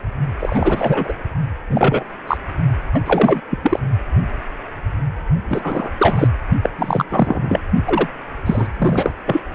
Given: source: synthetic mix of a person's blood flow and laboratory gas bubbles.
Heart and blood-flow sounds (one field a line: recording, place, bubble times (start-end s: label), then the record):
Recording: Doppler ultrasound of blood flow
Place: precordium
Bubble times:
0.39-1.14 s: bubbles
1.70-2.06 s: bubbles
2.27-2.38 s: bubbles
2.93-3.01 s: bubbles
3.05-3.41 s: bubbles
3.50-3.58 s: bubbles
3.63-3.80 s: bubbles
5.48-5.90 s: bubbles
5.98-6.29 s: bubbles
6.62-6.69 s: bubbles
6.77-7.04 s: bubbles
7.09-7.60 s: bubbles
7.86-8.07 s: bubbles
8.46-8.67 s: bubbles
8.79-9.12 s: bubbles
9.25-9.41 s: bubbles
From the record:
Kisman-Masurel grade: 333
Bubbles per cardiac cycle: rolling drumbeat, 9 or more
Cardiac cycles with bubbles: 50 to 99%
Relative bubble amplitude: loud (0.450 to 0.775)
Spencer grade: 3 (all of the cardiac periods contain showers or single bubble signals, but not dominating or overriding the cardiac motion signals)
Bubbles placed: only in the low amplitude regions of the cardiac cycle